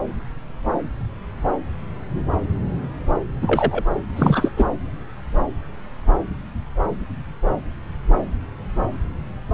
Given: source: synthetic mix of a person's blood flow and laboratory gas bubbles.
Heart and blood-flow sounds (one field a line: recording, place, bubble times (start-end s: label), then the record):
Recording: Doppler ultrasound of blood flow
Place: subclavian vein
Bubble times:
3.42-3.83 s: bubbles
4.16-4.49 s: bubbles
4.57-4.66 s: bubbles
From the record:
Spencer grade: 1 (occasional bubble signal discernible with the cardiac motion signal, with majority of cardiac periods free of bubbles)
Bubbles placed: anywhere in the cardiac cycle